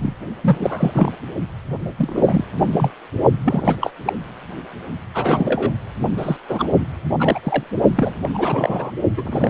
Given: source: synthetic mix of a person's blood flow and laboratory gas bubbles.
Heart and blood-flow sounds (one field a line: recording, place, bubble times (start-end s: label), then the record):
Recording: Doppler ultrasound of blood flow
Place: precordium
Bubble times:
0.00-0.16 s: bubbles
0.42-1.12 s: bubbles
1.97-2.44 s: bubbles
2.57-2.91 s: bubbles
3.42-3.76 s: bubbles
3.80-3.90 s: bubbles
4.05-4.13 s: bubbles
5.14-5.72 s: bubbles
6.18-6.37 s: bubbles
6.49-6.68 s: bubbles
7.19-7.39 s: bubbles
7.43-7.64 s: bubbles
7.95-8.14 s: bubbles
8.22-8.29 s: bubbles
8.34-8.92 s: bubbles
9.17-9.50 s: bubbles
From the record:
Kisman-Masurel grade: 342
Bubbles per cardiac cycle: rolling drumbeat, 9 or more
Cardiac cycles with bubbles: 100%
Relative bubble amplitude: moderate (0.250 to 0.450)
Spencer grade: 3 (all of the cardiac periods contain showers or single bubble signals, but not dominating or overriding the cardiac motion signals)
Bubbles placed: only in the low amplitude regions of the cardiac cycle